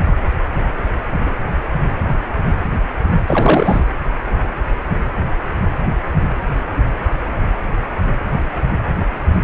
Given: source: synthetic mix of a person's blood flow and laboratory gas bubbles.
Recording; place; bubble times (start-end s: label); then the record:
Doppler ultrasound of blood flow; precordium
3.27-3.85 s: bubbles
From the record:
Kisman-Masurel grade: 213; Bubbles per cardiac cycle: several, 3 to 8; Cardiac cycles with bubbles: 1 to 10%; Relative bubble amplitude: loud (0.450 to 0.775); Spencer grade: 1 (occasional bubble signal discernible with the cardiac motion signal, with majority of cardiac periods free of bubbles); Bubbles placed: anywhere in the cardiac cycle